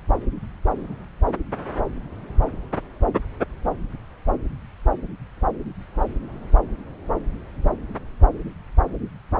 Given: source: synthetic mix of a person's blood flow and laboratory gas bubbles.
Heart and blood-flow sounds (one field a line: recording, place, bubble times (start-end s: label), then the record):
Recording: Doppler ultrasound of blood flow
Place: subclavian vein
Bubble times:
no bubbles
From the record:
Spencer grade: 0 (complete lack of bubble signals)